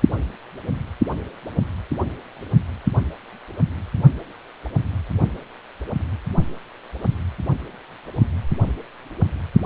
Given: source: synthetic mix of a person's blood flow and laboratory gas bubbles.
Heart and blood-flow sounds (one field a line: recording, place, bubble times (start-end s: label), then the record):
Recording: Doppler ultrasound of blood flow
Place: precordium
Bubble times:
no bubbles
From the record:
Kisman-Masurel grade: 000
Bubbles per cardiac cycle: 0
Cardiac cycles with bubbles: 0%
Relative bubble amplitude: no bubbles discernible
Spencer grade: 0 (complete lack of bubble signals)